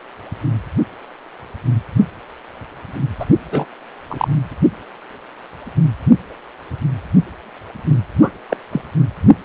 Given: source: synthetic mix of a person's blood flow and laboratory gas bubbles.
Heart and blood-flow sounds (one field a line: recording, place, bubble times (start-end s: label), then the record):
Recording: Doppler ultrasound of blood flow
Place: precordium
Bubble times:
3.19-3.25 s: bubbles
3.51-3.66 s: bubbles
4.08-4.28 s: bubbles
8.21-8.31 s: bubbles
8.48-8.57 s: bubbles
8.71-8.81 s: bubbles
From the record:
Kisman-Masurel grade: 223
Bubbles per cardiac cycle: several, 3 to 8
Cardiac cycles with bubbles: 10 to 50%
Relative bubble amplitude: loud (0.450 to 0.775)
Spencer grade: 2 (many but less than half of the cardiac periods contain bubble signals, singularly or in groups)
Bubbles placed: anywhere in the cardiac cycle